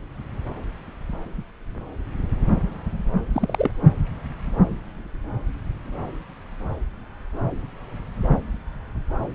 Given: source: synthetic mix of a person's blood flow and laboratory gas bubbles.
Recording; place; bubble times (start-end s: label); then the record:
Doppler ultrasound of blood flow; subclavian vein
3.33-3.71 s: bubbles
From the record:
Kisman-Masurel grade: 122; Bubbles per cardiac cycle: 1 to 2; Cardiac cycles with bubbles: 10 to 50%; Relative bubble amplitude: moderate (0.250 to 0.450); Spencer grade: 2 (many but less than half of the cardiac periods contain bubble signals, singularly or in groups); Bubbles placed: anywhere in the cardiac cycle